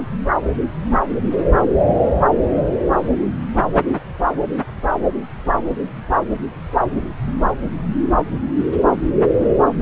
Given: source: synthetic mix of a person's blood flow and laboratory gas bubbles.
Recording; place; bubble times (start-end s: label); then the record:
Doppler ultrasound of blood flow; subclavian vein
no bubbles
From the record:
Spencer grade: 0 (complete lack of bubble signals)